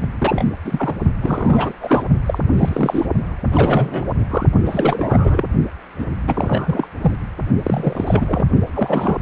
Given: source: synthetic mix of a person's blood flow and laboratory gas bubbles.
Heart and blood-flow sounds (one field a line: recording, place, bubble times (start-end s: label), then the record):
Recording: Doppler ultrasound of blood flow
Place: precordium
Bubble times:
0.01-0.08 s: bubbles
0.20-0.45 s: bubbles
0.64-0.95 s: bubbles
1.21-1.74 s: bubbles
1.81-2.04 s: bubbles
2.26-2.39 s: bubbles
2.57-3.06 s: bubbles
3.52-4.07 s: bubbles
4.31-4.46 s: bubbles
4.65-5.45 s: bubbles
5.98-6.04 s: bubbles
6.26-6.88 s: bubbles
7.01-7.15 s: bubbles
7.63-8.45 s: bubbles
8.74-9.18 s: bubbles
From the record:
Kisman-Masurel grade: 343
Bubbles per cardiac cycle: rolling drumbeat, 9 or more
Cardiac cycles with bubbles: 100%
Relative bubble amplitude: loud (0.450 to 0.775)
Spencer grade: 3 (all of the cardiac periods contain showers or single bubble signals, but not dominating or overriding the cardiac motion signals)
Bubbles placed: only in the low amplitude regions of the cardiac cycle